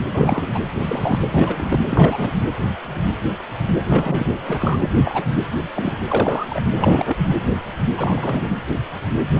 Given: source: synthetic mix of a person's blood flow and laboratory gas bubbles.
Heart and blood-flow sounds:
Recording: Doppler ultrasound of blood flow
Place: precordium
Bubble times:
0.11-0.59 s: bubbles
0.74-1.20 s: bubbles
1.30-1.80 s: bubbles
1.90-2.31 s: bubbles
3.89-4.36 s: bubbles
4.45-4.89 s: bubbles
5.04-5.24 s: bubbles
5.34-5.44 s: bubbles
5.75-5.92 s: bubbles
6.08-6.46 s: bubbles
6.49-6.61 s: bubbles
6.80-7.17 s: bubbles
7.97-8.50 s: bubbles
9.36-9.40 s: bubbles
From the record:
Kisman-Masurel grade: 232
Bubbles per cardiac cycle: several, 3 to 8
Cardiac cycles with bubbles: 50 to 99%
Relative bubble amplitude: moderate (0.250 to 0.450)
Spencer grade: 3 (all of the cardiac periods contain showers or single bubble signals, but not dominating or overriding the cardiac motion signals)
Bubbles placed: anywhere in the cardiac cycle

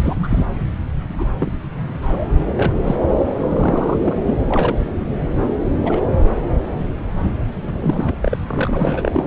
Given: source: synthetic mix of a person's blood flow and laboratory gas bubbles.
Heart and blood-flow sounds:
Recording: Doppler ultrasound of blood flow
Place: subclavian vein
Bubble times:
0.03-0.46 s: bubbles
1.17-1.27 s: bubbles
1.38-1.52 s: bubbles
2.02-2.29 s: bubbles
2.56-2.73 s: bubbles
2.83-2.96 s: bubbles
3.06-3.16 s: bubbles
3.38-4.17 s: bubbles
4.26-4.34 s: bubbles
4.48-4.75 s: bubbles
5.82-6.03 s: bubbles
7.63-8.39 s: bubbles
8.48-9.25 s: bubbles
From the record:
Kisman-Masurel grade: 242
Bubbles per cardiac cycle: several, 3 to 8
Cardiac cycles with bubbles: 100%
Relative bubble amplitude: moderate (0.250 to 0.450)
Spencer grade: 3 (all of the cardiac periods contain showers or single bubble signals, but not dominating or overriding the cardiac motion signals)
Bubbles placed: anywhere in the cardiac cycle

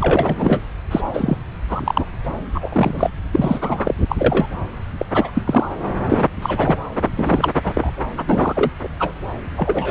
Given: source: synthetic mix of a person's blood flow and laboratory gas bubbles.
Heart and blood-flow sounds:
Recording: Doppler ultrasound of blood flow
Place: subclavian vein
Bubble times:
0.00-0.59 s: bubbles
0.91-1.01 s: bubbles
1.14-1.38 s: bubbles
1.69-2.06 s: bubbles
2.55-3.10 s: bubbles
3.32-3.95 s: bubbles
4.08-4.16 s: bubbles
4.18-4.46 s: bubbles
4.97-5.05 s: bubbles
5.13-5.69 s: bubbles
6.08-6.29 s: bubbles
6.42-6.77 s: bubbles
7.17-7.52 s: bubbles
7.63-7.91 s: bubbles
8.17-8.24 s: bubbles
8.29-8.71 s: bubbles
8.83-8.88 s: bubbles
8.99-9.13 s: bubbles
9.57-9.91 s: bubbles
From the record:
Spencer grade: 3 (all of the cardiac periods contain showers or single bubble signals, but not dominating or overriding the cardiac motion signals)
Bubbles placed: anywhere in the cardiac cycle

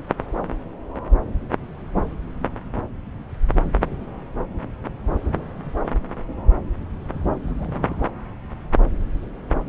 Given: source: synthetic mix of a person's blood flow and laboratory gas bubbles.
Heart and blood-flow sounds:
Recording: Doppler ultrasound of blood flow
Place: subclavian vein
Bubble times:
7.46-8.10 s: bubbles
From the record:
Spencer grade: 1 (occasional bubble signal discernible with the cardiac motion signal, with majority of cardiac periods free of bubbles)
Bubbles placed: anywhere in the cardiac cycle

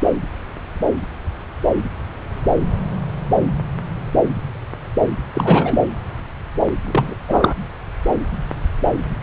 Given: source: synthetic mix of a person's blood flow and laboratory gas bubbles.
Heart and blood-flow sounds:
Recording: Doppler ultrasound of blood flow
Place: subclavian vein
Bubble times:
5.34-5.80 s: bubbles
6.86-7.16 s: bubbles
7.27-7.54 s: bubbles
From the record:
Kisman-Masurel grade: 223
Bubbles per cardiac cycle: several, 3 to 8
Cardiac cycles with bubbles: 10 to 50%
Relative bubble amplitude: loud (0.450 to 0.775)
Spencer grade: 2 (many but less than half of the cardiac periods contain bubble signals, singularly or in groups)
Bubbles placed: anywhere in the cardiac cycle

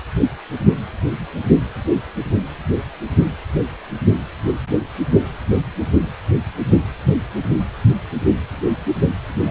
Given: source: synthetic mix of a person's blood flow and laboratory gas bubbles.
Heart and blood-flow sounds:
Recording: Doppler ultrasound of blood flow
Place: precordium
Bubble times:
9.37-9.51 s: bubbles
From the record:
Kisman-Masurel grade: 111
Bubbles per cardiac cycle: 1 to 2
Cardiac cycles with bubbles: 1 to 10%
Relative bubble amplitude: barely perceptible (0.100 to 0.250)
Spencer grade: 1 (occasional bubble signal discernible with the cardiac motion signal, with majority of cardiac periods free of bubbles)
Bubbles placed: only in the low amplitude regions of the cardiac cycle

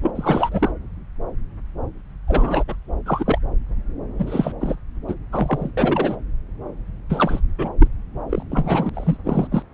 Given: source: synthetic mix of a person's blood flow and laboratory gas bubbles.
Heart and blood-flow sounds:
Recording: Doppler ultrasound of blood flow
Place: subclavian vein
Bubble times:
0.02-0.11 s: bubbles
0.15-0.72 s: bubbles
2.27-2.64 s: bubbles
2.68-2.75 s: bubbles
3.06-3.39 s: bubbles
4.18-4.52 s: bubbles
4.61-4.76 s: bubbles
5.07-5.15 s: bubbles
5.32-5.71 s: bubbles
5.77-6.16 s: bubbles
7.09-7.41 s: bubbles
7.58-7.69 s: bubbles
7.79-7.88 s: bubbles
8.29-8.42 s: bubbles
8.50-8.89 s: bubbles
8.93-9.17 s: bubbles
9.25-9.47 s: bubbles
9.51-9.62 s: bubbles
From the record:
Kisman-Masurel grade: 332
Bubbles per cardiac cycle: rolling drumbeat, 9 or more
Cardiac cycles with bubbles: 50 to 99%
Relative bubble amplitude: moderate (0.250 to 0.450)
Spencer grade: 3 (all of the cardiac periods contain showers or single bubble signals, but not dominating or overriding the cardiac motion signals)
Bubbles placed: anywhere in the cardiac cycle

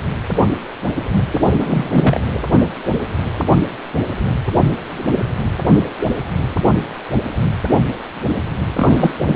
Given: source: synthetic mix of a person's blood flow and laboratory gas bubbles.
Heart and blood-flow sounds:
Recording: Doppler ultrasound of blood flow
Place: precordium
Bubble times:
1.31-1.40 s: bubbles
1.44-2.21 s: bubbles
8.76-9.14 s: bubbles
9.19-9.36 s: bubbles
From the record:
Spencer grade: 2 (many but less than half of the cardiac periods contain bubble signals, singularly or in groups)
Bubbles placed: anywhere in the cardiac cycle

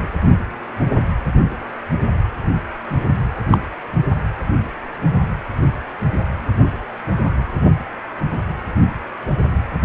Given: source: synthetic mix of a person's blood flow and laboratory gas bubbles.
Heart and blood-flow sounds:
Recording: Doppler ultrasound of blood flow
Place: precordium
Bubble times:
3.51-3.57 s: bubbles
From the record:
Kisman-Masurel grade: 123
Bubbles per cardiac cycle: 1 to 2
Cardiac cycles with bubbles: 10 to 50%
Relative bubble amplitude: loud (0.450 to 0.775)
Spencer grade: 2 (many but less than half of the cardiac periods contain bubble signals, singularly or in groups)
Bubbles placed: only in the low amplitude regions of the cardiac cycle

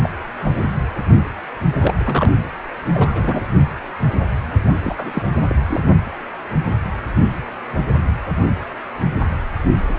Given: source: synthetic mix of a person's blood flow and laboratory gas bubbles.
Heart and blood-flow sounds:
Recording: Doppler ultrasound of blood flow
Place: precordium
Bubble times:
0.00-0.10 s: bubbles
0.42-0.65 s: bubbles
1.80-1.94 s: bubbles
2.00-2.33 s: bubbles
2.94-3.45 s: bubbles
4.83-5.23 s: bubbles
5.49-5.55 s: bubbles
5.67-5.80 s: bubbles
From the record:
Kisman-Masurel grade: 222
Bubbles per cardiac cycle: several, 3 to 8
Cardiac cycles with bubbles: 10 to 50%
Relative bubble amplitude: moderate (0.250 to 0.450)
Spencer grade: 2 (many but less than half of the cardiac periods contain bubble signals, singularly or in groups)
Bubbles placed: anywhere in the cardiac cycle

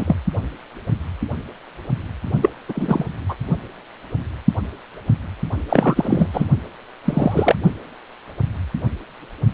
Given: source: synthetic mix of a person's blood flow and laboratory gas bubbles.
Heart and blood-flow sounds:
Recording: Doppler ultrasound of blood flow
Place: precordium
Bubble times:
0.00-0.16 s: bubbles
2.41-2.50 s: bubbles
2.69-3.06 s: bubbles
3.29-3.35 s: bubbles
5.69-6.29 s: bubbles
6.33-6.46 s: bubbles
7.04-7.55 s: bubbles
From the record:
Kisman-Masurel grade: 223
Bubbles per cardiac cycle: several, 3 to 8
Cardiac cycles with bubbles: 10 to 50%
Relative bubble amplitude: loud (0.450 to 0.775)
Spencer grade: 2 (many but less than half of the cardiac periods contain bubble signals, singularly or in groups)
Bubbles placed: only in the low amplitude regions of the cardiac cycle

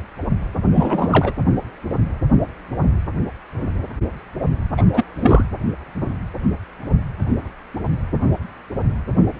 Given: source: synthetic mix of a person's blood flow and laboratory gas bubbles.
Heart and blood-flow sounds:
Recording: Doppler ultrasound of blood flow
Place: precordium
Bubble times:
0.74-1.32 s: bubbles
4.77-4.86 s: bubbles
4.94-5.04 s: bubbles
5.14-5.46 s: bubbles
From the record:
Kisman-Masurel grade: 223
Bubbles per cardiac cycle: several, 3 to 8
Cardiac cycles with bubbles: 10 to 50%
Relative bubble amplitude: loud (0.450 to 0.775)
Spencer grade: 2 (many but less than half of the cardiac periods contain bubble signals, singularly or in groups)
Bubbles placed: anywhere in the cardiac cycle

